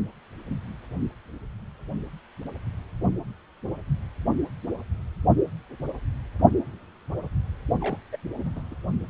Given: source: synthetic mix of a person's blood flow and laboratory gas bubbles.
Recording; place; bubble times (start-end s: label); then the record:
Doppler ultrasound of blood flow; precordium
7.81-7.98 s: bubbles
8.12-8.17 s: bubbles
8.38-8.61 s: bubbles
8.71-8.75 s: bubbles
From the record:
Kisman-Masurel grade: 221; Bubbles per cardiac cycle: several, 3 to 8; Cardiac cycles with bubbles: 10 to 50%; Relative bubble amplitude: barely perceptible (0.100 to 0.250); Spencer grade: 2 (many but less than half of the cardiac periods contain bubble signals, singularly or in groups); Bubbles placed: only in the low amplitude regions of the cardiac cycle